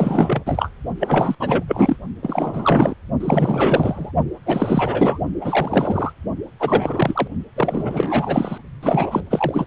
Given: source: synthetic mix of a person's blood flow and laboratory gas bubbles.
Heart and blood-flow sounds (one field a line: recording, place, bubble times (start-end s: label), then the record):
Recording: Doppler ultrasound of blood flow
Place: precordium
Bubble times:
0.00-0.43 s: bubbles
0.46-0.71 s: bubbles
1.00-1.35 s: bubbles
1.40-1.64 s: bubbles
1.68-1.96 s: bubbles
2.22-2.94 s: bubbles
3.20-4.12 s: bubbles
4.46-5.25 s: bubbles
5.41-6.12 s: bubbles
6.59-7.28 s: bubbles
7.56-8.58 s: bubbles
8.82-9.23 s: bubbles
9.30-9.67 s: bubbles
From the record:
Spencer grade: 4 (maximum detectable bubble signal sounding continuously throughout systole and diastole of every cardiac period, and overriding the amplitude of the normal cardiac signals)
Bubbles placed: only in the low amplitude regions of the cardiac cycle